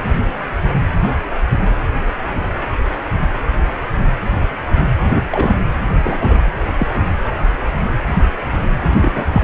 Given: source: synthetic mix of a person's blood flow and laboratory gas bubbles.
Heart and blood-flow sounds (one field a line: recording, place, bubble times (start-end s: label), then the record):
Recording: Doppler ultrasound of blood flow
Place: precordium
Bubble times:
5.15-5.21 s: bubbles
5.31-5.55 s: bubbles
6.04-6.53 s: bubbles
6.78-6.88 s: bubbles
8.90-9.24 s: bubbles
9.32-9.41 s: bubbles
From the record:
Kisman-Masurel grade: 222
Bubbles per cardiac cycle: several, 3 to 8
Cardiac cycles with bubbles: 10 to 50%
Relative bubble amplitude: moderate (0.250 to 0.450)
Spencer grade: 2 (many but less than half of the cardiac periods contain bubble signals, singularly or in groups)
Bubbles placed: anywhere in the cardiac cycle